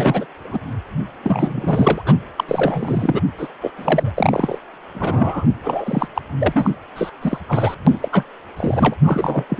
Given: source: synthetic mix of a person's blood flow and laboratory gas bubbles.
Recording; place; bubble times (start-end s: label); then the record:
Doppler ultrasound of blood flow; precordium
0.00-0.26 s: bubbles
0.43-0.60 s: bubbles
1.23-2.02 s: bubbles
2.04-2.18 s: bubbles
2.36-2.44 s: bubbles
2.48-3.22 s: bubbles
3.38-3.49 s: bubbles
3.60-3.72 s: bubbles
3.77-4.12 s: bubbles
4.16-4.58 s: bubbles
4.94-5.47 s: bubbles
5.63-6.08 s: bubbles
6.15-6.21 s: bubbles
6.39-6.71 s: bubbles
6.96-7.11 s: bubbles
7.21-7.38 s: bubbles
7.48-7.75 s: bubbles
7.87-8.09 s: bubbles
8.12-8.24 s: bubbles
8.56-8.94 s: bubbles
9.04-9.46 s: bubbles
9.49-9.60 s: bubbles
From the record:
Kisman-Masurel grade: 343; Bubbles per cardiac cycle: rolling drumbeat, 9 or more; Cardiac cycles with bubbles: 100%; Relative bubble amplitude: loud (0.450 to 0.775); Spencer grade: 3 (all of the cardiac periods contain showers or single bubble signals, but not dominating or overriding the cardiac motion signals); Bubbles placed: anywhere in the cardiac cycle